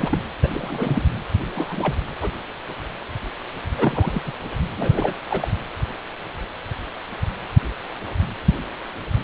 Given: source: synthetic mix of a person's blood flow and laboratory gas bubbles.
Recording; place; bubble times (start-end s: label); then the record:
Doppler ultrasound of blood flow; precordium
0.00-0.18 s: bubbles
0.42-0.50 s: bubbles
0.54-1.03 s: bubbles
1.55-1.95 s: bubbles
2.21-2.32 s: bubbles
3.77-4.21 s: bubbles
4.25-4.33 s: bubbles
4.77-5.14 s: bubbles
5.30-5.48 s: bubbles
From the record:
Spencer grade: 3 (all of the cardiac periods contain showers or single bubble signals, but not dominating or overriding the cardiac motion signals); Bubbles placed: anywhere in the cardiac cycle